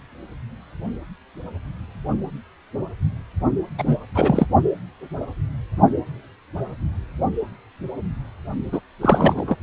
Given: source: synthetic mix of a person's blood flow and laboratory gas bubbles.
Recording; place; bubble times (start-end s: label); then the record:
Doppler ultrasound of blood flow; precordium
3.78-3.97 s: bubbles
4.15-4.47 s: bubbles
8.72-8.80 s: bubbles
9.01-9.55 s: bubbles
From the record:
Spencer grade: 2 (many but less than half of the cardiac periods contain bubble signals, singularly or in groups); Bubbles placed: only in the low amplitude regions of the cardiac cycle